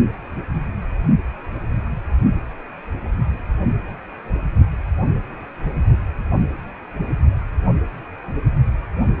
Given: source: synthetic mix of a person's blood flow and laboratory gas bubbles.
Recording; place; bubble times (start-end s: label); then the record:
Doppler ultrasound of blood flow; precordium
no bubbles
From the record:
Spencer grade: 0 (complete lack of bubble signals)